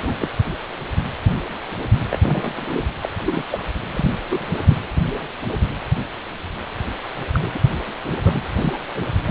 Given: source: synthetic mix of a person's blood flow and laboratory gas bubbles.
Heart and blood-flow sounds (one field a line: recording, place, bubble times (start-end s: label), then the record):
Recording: Doppler ultrasound of blood flow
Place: precordium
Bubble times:
0.00-0.14 s: bubbles
0.20-0.28 s: bubbles
2.09-2.18 s: bubbles
2.22-2.87 s: bubbles
3.01-3.09 s: bubbles
3.25-3.44 s: bubbles
3.51-3.65 s: bubbles
3.91-4.18 s: bubbles
4.30-4.47 s: bubbles
4.69-4.76 s: bubbles
7.31-7.59 s: bubbles
8.04-8.15 s: bubbles
8.23-8.42 s: bubbles
8.55-8.77 s: bubbles
9.25-9.31 s: bubbles
From the record:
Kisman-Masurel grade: 232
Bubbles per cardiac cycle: several, 3 to 8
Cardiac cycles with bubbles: 50 to 99%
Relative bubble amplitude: moderate (0.250 to 0.450)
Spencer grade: 3 (all of the cardiac periods contain showers or single bubble signals, but not dominating or overriding the cardiac motion signals)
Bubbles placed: anywhere in the cardiac cycle